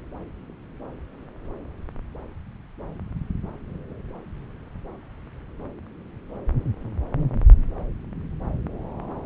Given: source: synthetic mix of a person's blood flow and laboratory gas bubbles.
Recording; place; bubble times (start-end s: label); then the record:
Doppler ultrasound of blood flow; subclavian vein
no bubbles
From the record:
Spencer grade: 0 (complete lack of bubble signals)